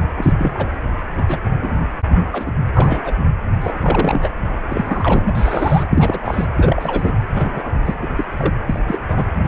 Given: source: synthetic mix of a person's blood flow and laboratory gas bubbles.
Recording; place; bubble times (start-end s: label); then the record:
Doppler ultrasound of blood flow; precordium
0.16-0.33 s: bubbles
0.38-0.68 s: bubbles
1.17-1.25 s: bubbles
1.28-1.38 s: bubbles
1.60-1.71 s: bubbles
2.32-2.52 s: bubbles
2.73-3.13 s: bubbles
3.61-4.29 s: bubbles
4.68-5.83 s: bubbles
5.89-6.45 s: bubbles
6.56-7.14 s: bubbles
7.28-7.79 s: bubbles
7.85-7.94 s: bubbles
7.98-8.07 s: bubbles
8.15-8.24 s: bubbles
8.37-8.54 s: bubbles
8.66-8.79 s: bubbles
8.87-8.97 s: bubbles
9.08-9.23 s: bubbles
9.45-9.48 s: bubbles
From the record:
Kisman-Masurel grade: 242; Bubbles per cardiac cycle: several, 3 to 8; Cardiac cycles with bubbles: 100%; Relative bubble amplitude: moderate (0.250 to 0.450); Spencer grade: 3 (all of the cardiac periods contain showers or single bubble signals, but not dominating or overriding the cardiac motion signals); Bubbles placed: anywhere in the cardiac cycle